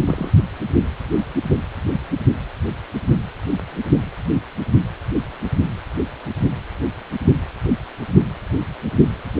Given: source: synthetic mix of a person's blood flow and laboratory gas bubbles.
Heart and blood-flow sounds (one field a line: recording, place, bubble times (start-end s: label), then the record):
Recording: Doppler ultrasound of blood flow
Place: precordium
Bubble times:
0.07-0.30 s: bubbles
From the record:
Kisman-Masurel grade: 112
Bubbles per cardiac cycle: 1 to 2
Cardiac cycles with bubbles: 1 to 10%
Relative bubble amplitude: moderate (0.250 to 0.450)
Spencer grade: 1 (occasional bubble signal discernible with the cardiac motion signal, with majority of cardiac periods free of bubbles)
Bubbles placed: only in the low amplitude regions of the cardiac cycle